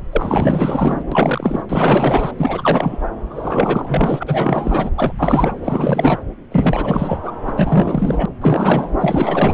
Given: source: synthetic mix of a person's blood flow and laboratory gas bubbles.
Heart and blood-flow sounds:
Doppler ultrasound of blood flow; subclavian vein
0.12-1.04 s: bubbles
1.11-1.62 s: bubbles
1.69-2.31 s: bubbles
2.38-2.99 s: bubbles
3.30-4.24 s: bubbles
4.27-4.91 s: bubbles
4.96-5.12 s: bubbles
5.19-5.54 s: bubbles
5.62-6.19 s: bubbles
6.51-7.19 s: bubbles
7.23-7.32 s: bubbles
7.47-7.53 s: bubbles
7.56-8.25 s: bubbles
8.40-8.89 s: bubbles
8.99-9.54 s: bubbles
From the record:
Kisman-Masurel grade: 444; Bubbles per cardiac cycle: continuous sound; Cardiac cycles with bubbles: 100%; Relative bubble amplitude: maximal (0.775 to 0.999); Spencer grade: 4 (maximum detectable bubble signal sounding continuously throughout systole and diastole of every cardiac period, and overriding the amplitude of the normal cardiac signals); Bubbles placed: anywhere in the cardiac cycle

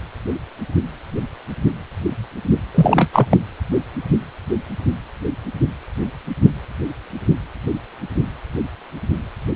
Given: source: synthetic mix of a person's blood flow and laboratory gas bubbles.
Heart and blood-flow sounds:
Doppler ultrasound of blood flow; precordium
2.74-3.09 s: bubbles
3.13-3.27 s: bubbles
3.30-3.37 s: bubbles
From the record:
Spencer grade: 1 (occasional bubble signal discernible with the cardiac motion signal, with majority of cardiac periods free of bubbles); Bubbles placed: anywhere in the cardiac cycle

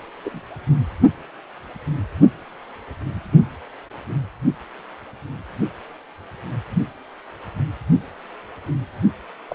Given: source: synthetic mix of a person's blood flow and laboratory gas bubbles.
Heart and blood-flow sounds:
Doppler ultrasound of blood flow; precordium
0.25-0.41 s: bubbles
9.49-9.55 s: bubbles
From the record:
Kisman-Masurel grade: 121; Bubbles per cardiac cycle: 1 to 2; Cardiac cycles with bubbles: 10 to 50%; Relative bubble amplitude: barely perceptible (0.100 to 0.250); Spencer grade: 2 (many but less than half of the cardiac periods contain bubble signals, singularly or in groups); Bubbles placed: anywhere in the cardiac cycle

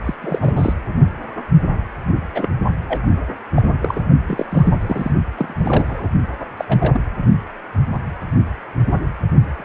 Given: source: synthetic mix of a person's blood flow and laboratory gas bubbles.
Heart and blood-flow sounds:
Doppler ultrasound of blood flow; precordium
0.05-0.15 s: bubbles
0.22-0.39 s: bubbles
0.41-0.73 s: bubbles
2.35-2.49 s: bubbles
2.88-3.00 s: bubbles
3.55-3.62 s: bubbles
3.81-4.01 s: bubbles
4.27-4.46 s: bubbles
4.50-4.78 s: bubbles
4.80-5.11 s: bubbles
5.36-5.54 s: bubbles
5.58-6.09 s: bubbles
6.57-6.65 s: bubbles
6.68-7.01 s: bubbles
9.58-9.64 s: bubbles
From the record:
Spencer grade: 3 (all of the cardiac periods contain showers or single bubble signals, but not dominating or overriding the cardiac motion signals); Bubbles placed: only in the low amplitude regions of the cardiac cycle

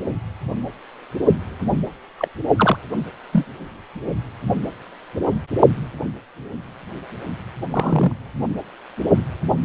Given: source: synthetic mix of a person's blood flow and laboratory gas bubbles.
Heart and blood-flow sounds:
Doppler ultrasound of blood flow; precordium
2.19-2.28 s: bubbles
2.56-2.77 s: bubbles
3.33-3.45 s: bubbles
7.71-8.12 s: bubbles
From the record:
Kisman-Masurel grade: 122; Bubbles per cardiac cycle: 1 to 2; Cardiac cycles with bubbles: 10 to 50%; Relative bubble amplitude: moderate (0.250 to 0.450); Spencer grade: 2 (many but less than half of the cardiac periods contain bubble signals, singularly or in groups); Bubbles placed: only in the low amplitude regions of the cardiac cycle

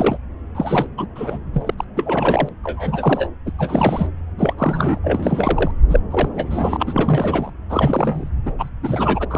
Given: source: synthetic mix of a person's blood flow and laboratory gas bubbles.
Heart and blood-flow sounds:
Doppler ultrasound of blood flow; subclavian vein
0.00-0.18 s: bubbles
0.54-0.86 s: bubbles
0.98-1.07 s: bubbles
1.16-1.38 s: bubbles
1.54-1.74 s: bubbles
1.78-1.85 s: bubbles
1.96-2.49 s: bubbles
2.64-3.29 s: bubbles
3.46-3.51 s: bubbles
3.58-4.07 s: bubbles
4.37-4.54 s: bubbles
4.58-4.99 s: bubbles
5.04-5.71 s: bubbles
5.89-6.00 s: bubbles
6.11-6.77 s: bubbles
6.79-7.51 s: bubbles
7.69-8.30 s: bubbles
8.45-8.51 s: bubbles
8.58-8.68 s: bubbles
8.82-9.25 s: bubbles
9.30-9.38 s: bubbles
From the record:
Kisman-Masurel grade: 342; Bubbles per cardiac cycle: rolling drumbeat, 9 or more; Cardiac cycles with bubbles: 100%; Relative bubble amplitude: moderate (0.250 to 0.450); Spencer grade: 3 (all of the cardiac periods contain showers or single bubble signals, but not dominating or overriding the cardiac motion signals); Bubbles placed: anywhere in the cardiac cycle

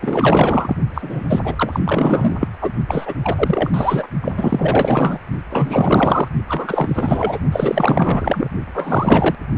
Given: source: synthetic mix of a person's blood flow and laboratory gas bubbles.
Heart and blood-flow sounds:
Doppler ultrasound of blood flow; precordium
0.01-0.76 s: bubbles
0.94-1.40 s: bubbles
1.44-1.80 s: bubbles
1.85-2.48 s: bubbles
2.61-2.72 s: bubbles
2.88-3.14 s: bubbles
3.23-3.70 s: bubbles
3.73-4.08 s: bubbles
4.21-5.19 s: bubbles
5.50-6.28 s: bubbles
6.47-7.39 s: bubbles
7.52-8.50 s: bubbles
8.74-9.35 s: bubbles
From the record:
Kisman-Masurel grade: 444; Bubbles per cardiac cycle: continuous sound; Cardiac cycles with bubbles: 100%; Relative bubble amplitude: maximal (0.775 to 0.999); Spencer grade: 4 (maximum detectable bubble signal sounding continuously throughout systole and diastole of every cardiac period, and overriding the amplitude of the normal cardiac signals); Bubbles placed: only in the low amplitude regions of the cardiac cycle

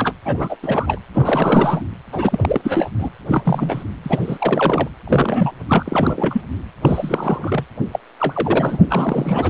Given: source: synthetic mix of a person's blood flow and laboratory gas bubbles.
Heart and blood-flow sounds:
Doppler ultrasound of blood flow; precordium
0.00-0.12 s: bubbles
0.25-0.56 s: bubbles
0.62-1.00 s: bubbles
1.13-1.82 s: bubbles
2.12-2.89 s: bubbles
2.99-3.10 s: bubbles
3.28-3.84 s: bubbles
4.04-4.88 s: bubbles
5.07-5.51 s: bubbles
5.67-6.42 s: bubbles
6.81-7.64 s: bubbles
7.92-8.00 s: bubbles
8.19-8.78 s: bubbles
8.89-9.50 s: bubbles
From the record:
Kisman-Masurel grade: 342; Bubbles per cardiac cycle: rolling drumbeat, 9 or more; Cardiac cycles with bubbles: 100%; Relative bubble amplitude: moderate (0.250 to 0.450); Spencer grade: 3 (all of the cardiac periods contain showers or single bubble signals, but not dominating or overriding the cardiac motion signals); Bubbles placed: anywhere in the cardiac cycle

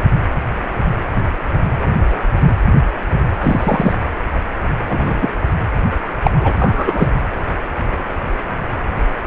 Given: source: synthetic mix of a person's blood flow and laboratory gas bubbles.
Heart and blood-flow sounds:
Doppler ultrasound of blood flow; precordium
1.15-1.22 s: bubbles
2.10-2.18 s: bubbles
3.41-3.93 s: bubbles
4.88-5.29 s: bubbles
6.23-6.30 s: bubbles
6.41-6.53 s: bubbles
6.59-7.09 s: bubbles
From the record:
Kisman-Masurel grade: 123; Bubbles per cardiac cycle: 1 to 2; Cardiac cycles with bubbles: 10 to 50%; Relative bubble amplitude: loud (0.450 to 0.775); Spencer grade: 2 (many but less than half of the cardiac periods contain bubble signals, singularly or in groups); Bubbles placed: anywhere in the cardiac cycle

